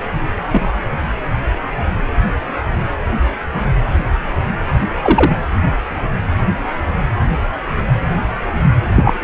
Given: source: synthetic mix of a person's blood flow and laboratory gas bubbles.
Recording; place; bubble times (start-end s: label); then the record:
Doppler ultrasound of blood flow; precordium
0.51-0.77 s: bubbles
5.02-5.32 s: bubbles
8.96-9.13 s: bubbles
From the record:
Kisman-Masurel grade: 123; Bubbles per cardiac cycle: 1 to 2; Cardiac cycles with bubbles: 10 to 50%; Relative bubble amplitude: loud (0.450 to 0.775); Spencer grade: 2 (many but less than half of the cardiac periods contain bubble signals, singularly or in groups); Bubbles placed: anywhere in the cardiac cycle